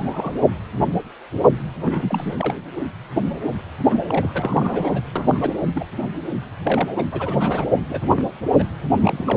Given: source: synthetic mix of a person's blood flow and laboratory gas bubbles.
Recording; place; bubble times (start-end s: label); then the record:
Doppler ultrasound of blood flow; precordium
0.00-0.37 s: bubbles
1.82-2.55 s: bubbles
3.88-5.01 s: bubbles
5.16-5.54 s: bubbles
5.75-5.85 s: bubbles
6.02-6.08 s: bubbles
6.63-6.93 s: bubbles
6.96-7.04 s: bubbles
7.12-7.66 s: bubbles
7.89-8.01 s: bubbles
8.08-8.24 s: bubbles
8.58-8.64 s: bubbles
8.92-9.24 s: bubbles
9.27-9.37 s: bubbles
From the record:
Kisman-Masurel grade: 232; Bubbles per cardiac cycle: several, 3 to 8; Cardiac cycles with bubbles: 50 to 99%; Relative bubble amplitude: moderate (0.250 to 0.450); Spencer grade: 3 (all of the cardiac periods contain showers or single bubble signals, but not dominating or overriding the cardiac motion signals); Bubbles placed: anywhere in the cardiac cycle